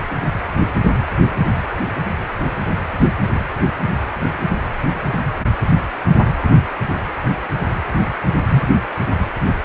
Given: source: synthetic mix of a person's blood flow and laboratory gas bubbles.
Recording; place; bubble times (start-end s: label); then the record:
Doppler ultrasound of blood flow; precordium
8.48-8.62 s: bubbles
From the record:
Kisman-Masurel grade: 113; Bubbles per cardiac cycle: 1 to 2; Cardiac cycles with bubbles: 1 to 10%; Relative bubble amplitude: loud (0.450 to 0.775); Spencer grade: 1 (occasional bubble signal discernible with the cardiac motion signal, with majority of cardiac periods free of bubbles); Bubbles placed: anywhere in the cardiac cycle